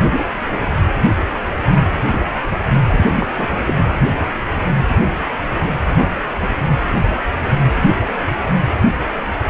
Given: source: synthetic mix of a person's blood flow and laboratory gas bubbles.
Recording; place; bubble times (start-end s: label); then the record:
Doppler ultrasound of blood flow; precordium
2.87-3.04 s: bubbles
3.20-3.27 s: bubbles
3.37-3.47 s: bubbles
3.66-3.74 s: bubbles
From the record:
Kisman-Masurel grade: 212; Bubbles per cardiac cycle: several, 3 to 8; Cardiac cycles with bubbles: 1 to 10%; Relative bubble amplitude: moderate (0.250 to 0.450); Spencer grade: 1 (occasional bubble signal discernible with the cardiac motion signal, with majority of cardiac periods free of bubbles); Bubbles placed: anywhere in the cardiac cycle